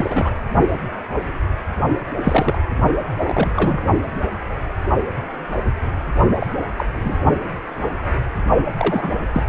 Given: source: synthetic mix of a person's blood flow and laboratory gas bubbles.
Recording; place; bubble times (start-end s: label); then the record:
Doppler ultrasound of blood flow; precordium
0.00-0.30 s: bubbles
2.23-2.58 s: bubbles
3.20-3.85 s: bubbles
6.40-6.46 s: bubbles
6.77-6.86 s: bubbles
6.96-7.17 s: bubbles
8.77-9.14 s: bubbles
9.33-9.41 s: bubbles
From the record:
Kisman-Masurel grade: 232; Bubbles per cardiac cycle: several, 3 to 8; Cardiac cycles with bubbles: 50 to 99%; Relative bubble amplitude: moderate (0.250 to 0.450); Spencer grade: 3 (all of the cardiac periods contain showers or single bubble signals, but not dominating or overriding the cardiac motion signals); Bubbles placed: only in the low amplitude regions of the cardiac cycle